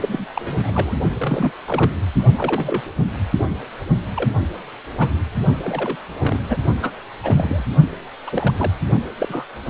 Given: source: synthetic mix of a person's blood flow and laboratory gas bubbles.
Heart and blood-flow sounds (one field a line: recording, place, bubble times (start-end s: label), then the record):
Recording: Doppler ultrasound of blood flow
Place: precordium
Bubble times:
0.01-0.25 s: bubbles
0.34-0.94 s: bubbles
1.18-1.51 s: bubbles
1.66-1.91 s: bubbles
2.36-2.82 s: bubbles
3.38-3.46 s: bubbles
4.14-4.30 s: bubbles
4.97-5.12 s: bubbles
5.62-5.98 s: bubbles
6.19-6.39 s: bubbles
6.49-6.56 s: bubbles
6.81-6.90 s: bubbles
7.23-7.64 s: bubbles
8.27-8.53 s: bubbles
8.56-8.72 s: bubbles
9.18-9.45 s: bubbles
9.67-9.70 s: bubbles
From the record:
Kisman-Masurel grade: 242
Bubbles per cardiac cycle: several, 3 to 8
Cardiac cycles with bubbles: 100%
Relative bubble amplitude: moderate (0.250 to 0.450)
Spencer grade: 3 (all of the cardiac periods contain showers or single bubble signals, but not dominating or overriding the cardiac motion signals)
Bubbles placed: only in the low amplitude regions of the cardiac cycle